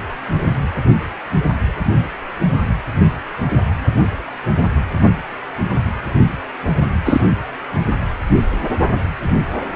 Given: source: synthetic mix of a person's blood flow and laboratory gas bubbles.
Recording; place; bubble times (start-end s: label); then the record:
Doppler ultrasound of blood flow; precordium
7.04-7.21 s: bubbles
From the record:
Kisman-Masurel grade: 113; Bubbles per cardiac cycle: 1 to 2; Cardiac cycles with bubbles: 1 to 10%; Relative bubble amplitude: loud (0.450 to 0.775); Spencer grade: 1 (occasional bubble signal discernible with the cardiac motion signal, with majority of cardiac periods free of bubbles); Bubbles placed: anywhere in the cardiac cycle